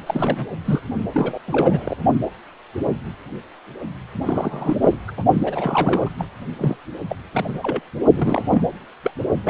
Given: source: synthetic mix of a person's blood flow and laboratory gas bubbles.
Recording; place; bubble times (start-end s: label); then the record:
Doppler ultrasound of blood flow; precordium
0.06-0.46 s: bubbles
0.65-0.81 s: bubbles
1.14-1.39 s: bubbles
1.47-1.97 s: bubbles
4.22-4.77 s: bubbles
4.82-4.97 s: bubbles
5.08-5.11 s: bubbles
5.17-5.24 s: bubbles
5.33-6.09 s: bubbles
6.18-6.25 s: bubbles
6.58-6.77 s: bubbles
7.09-7.16 s: bubbles
7.33-7.80 s: bubbles
8.14-8.62 s: bubbles
9.04-9.12 s: bubbles
9.44-9.50 s: bubbles
From the record:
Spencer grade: 3 (all of the cardiac periods contain showers or single bubble signals, but not dominating or overriding the cardiac motion signals); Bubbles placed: only in the low amplitude regions of the cardiac cycle